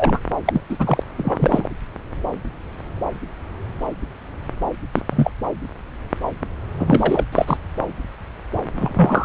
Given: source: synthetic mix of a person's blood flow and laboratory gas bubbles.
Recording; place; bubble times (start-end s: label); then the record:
Doppler ultrasound of blood flow; subclavian vein
0.00-0.18 s: bubbles
0.45-0.61 s: bubbles
0.69-1.03 s: bubbles
1.18-1.69 s: bubbles
4.96-5.02 s: bubbles
5.10-5.31 s: bubbles
6.79-7.24 s: bubbles
7.32-7.57 s: bubbles
8.76-9.24 s: bubbles
From the record:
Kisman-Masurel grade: 233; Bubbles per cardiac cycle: several, 3 to 8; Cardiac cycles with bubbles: 50 to 99%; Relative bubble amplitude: loud (0.450 to 0.775); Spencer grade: 3 (all of the cardiac periods contain showers or single bubble signals, but not dominating or overriding the cardiac motion signals); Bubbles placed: anywhere in the cardiac cycle